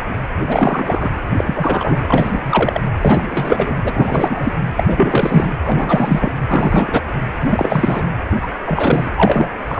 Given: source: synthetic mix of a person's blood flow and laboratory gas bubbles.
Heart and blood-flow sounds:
Doppler ultrasound of blood flow; precordium
0.46-1.10 s: bubbles
1.37-2.41 s: bubbles
2.45-2.81 s: bubbles
3.01-3.25 s: bubbles
3.31-3.75 s: bubbles
3.83-4.52 s: bubbles
4.61-4.67 s: bubbles
4.76-4.83 s: bubbles
4.87-5.55 s: bubbles
5.66-6.32 s: bubbles
6.50-7.01 s: bubbles
7.46-8.07 s: bubbles
8.31-8.51 s: bubbles
8.66-9.10 s: bubbles
9.16-9.50 s: bubbles
9.68-9.80 s: bubbles
From the record:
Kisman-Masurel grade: 333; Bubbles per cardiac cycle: rolling drumbeat, 9 or more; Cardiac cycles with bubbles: 50 to 99%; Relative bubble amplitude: loud (0.450 to 0.775); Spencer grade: 3 (all of the cardiac periods contain showers or single bubble signals, but not dominating or overriding the cardiac motion signals); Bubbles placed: anywhere in the cardiac cycle

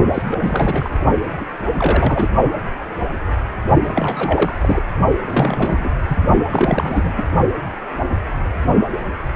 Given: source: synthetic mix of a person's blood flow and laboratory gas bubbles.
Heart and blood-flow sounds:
Doppler ultrasound of blood flow; precordium
0.14-0.92 s: bubbles
1.40-1.45 s: bubbles
1.74-2.28 s: bubbles
3.84-4.82 s: bubbles
5.23-5.90 s: bubbles
6.08-6.17 s: bubbles
6.51-7.12 s: bubbles
7.15-7.24 s: bubbles
From the record:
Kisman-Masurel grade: 332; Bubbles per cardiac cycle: rolling drumbeat, 9 or more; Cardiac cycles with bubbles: 50 to 99%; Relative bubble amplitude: moderate (0.250 to 0.450); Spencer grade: 3 (all of the cardiac periods contain showers or single bubble signals, but not dominating or overriding the cardiac motion signals); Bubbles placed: only in the low amplitude regions of the cardiac cycle

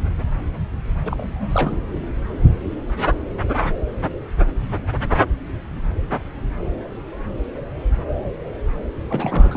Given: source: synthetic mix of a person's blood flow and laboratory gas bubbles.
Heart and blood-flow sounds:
Doppler ultrasound of blood flow; subclavian vein
1.04-1.77 s: bubbles
9.08-9.57 s: bubbles
From the record:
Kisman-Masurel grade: 221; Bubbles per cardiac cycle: several, 3 to 8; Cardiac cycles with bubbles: 10 to 50%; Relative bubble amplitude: barely perceptible (0.100 to 0.250); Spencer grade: 2 (many but less than half of the cardiac periods contain bubble signals, singularly or in groups); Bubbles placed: anywhere in the cardiac cycle

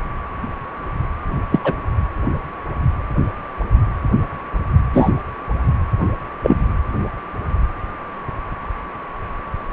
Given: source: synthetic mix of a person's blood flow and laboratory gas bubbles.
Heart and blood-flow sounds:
Doppler ultrasound of blood flow; precordium
1.50-1.59 s: bubbles
1.64-1.72 s: bubbles
4.93-5.12 s: bubbles
6.43-6.57 s: bubbles
From the record:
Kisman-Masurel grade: 123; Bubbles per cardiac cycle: 1 to 2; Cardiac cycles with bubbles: 10 to 50%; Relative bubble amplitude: loud (0.450 to 0.775); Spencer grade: 2 (many but less than half of the cardiac periods contain bubble signals, singularly or in groups); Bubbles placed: anywhere in the cardiac cycle

